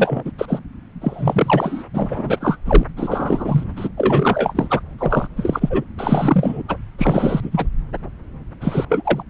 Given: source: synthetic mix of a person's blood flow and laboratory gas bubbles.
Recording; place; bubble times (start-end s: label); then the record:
Doppler ultrasound of blood flow; subclavian vein
0.00-0.32 s: bubbles
0.38-0.59 s: bubbles
1.01-1.83 s: bubbles
1.94-2.38 s: bubbles
2.40-2.56 s: bubbles
2.65-2.83 s: bubbles
2.96-3.64 s: bubbles
3.76-3.88 s: bubbles
3.97-4.80 s: bubbles
4.99-5.28 s: bubbles
5.37-5.83 s: bubbles
5.97-6.63 s: bubbles
6.68-6.78 s: bubbles
6.98-7.67 s: bubbles
8.61-8.85 s: bubbles
8.89-9.23 s: bubbles
From the record:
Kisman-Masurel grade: 343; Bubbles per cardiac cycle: rolling drumbeat, 9 or more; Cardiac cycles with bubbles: 100%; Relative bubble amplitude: loud (0.450 to 0.775); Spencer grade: 3 (all of the cardiac periods contain showers or single bubble signals, but not dominating or overriding the cardiac motion signals); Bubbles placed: anywhere in the cardiac cycle